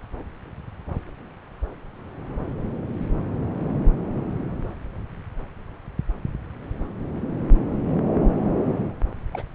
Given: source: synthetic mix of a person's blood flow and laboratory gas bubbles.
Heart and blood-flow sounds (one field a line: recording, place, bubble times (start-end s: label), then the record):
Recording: Doppler ultrasound of blood flow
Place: subclavian vein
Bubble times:
9.32-9.42 s: bubbles
From the record:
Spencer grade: 1 (occasional bubble signal discernible with the cardiac motion signal, with majority of cardiac periods free of bubbles)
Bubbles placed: anywhere in the cardiac cycle